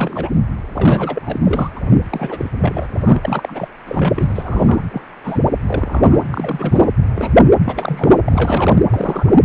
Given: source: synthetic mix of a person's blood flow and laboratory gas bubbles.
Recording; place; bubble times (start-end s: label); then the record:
Doppler ultrasound of blood flow; precordium
0.00-0.30 s: bubbles
0.74-1.40 s: bubbles
1.43-1.71 s: bubbles
1.75-1.80 s: bubbles
2.10-2.46 s: bubbles
2.60-2.87 s: bubbles
2.98-3.68 s: bubbles
3.86-4.79 s: bubbles
4.91-5.01 s: bubbles
5.24-5.41 s: bubbles
5.67-6.23 s: bubbles
6.31-6.92 s: bubbles
7.16-7.43 s: bubbles
7.65-8.13 s: bubbles
8.25-8.85 s: bubbles
8.89-9.39 s: bubbles
From the record:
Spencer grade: 3 (all of the cardiac periods contain showers or single bubble signals, but not dominating or overriding the cardiac motion signals); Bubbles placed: anywhere in the cardiac cycle